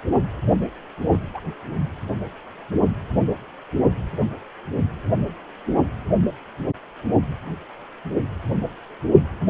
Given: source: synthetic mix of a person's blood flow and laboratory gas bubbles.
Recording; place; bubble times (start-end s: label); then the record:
Doppler ultrasound of blood flow; precordium
1.12-1.19 s: bubbles
1.34-1.41 s: bubbles
From the record:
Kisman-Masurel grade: 111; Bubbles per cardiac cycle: 1 to 2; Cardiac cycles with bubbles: 1 to 10%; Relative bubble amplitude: barely perceptible (0.100 to 0.250); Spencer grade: 1 (occasional bubble signal discernible with the cardiac motion signal, with majority of cardiac periods free of bubbles); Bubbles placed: anywhere in the cardiac cycle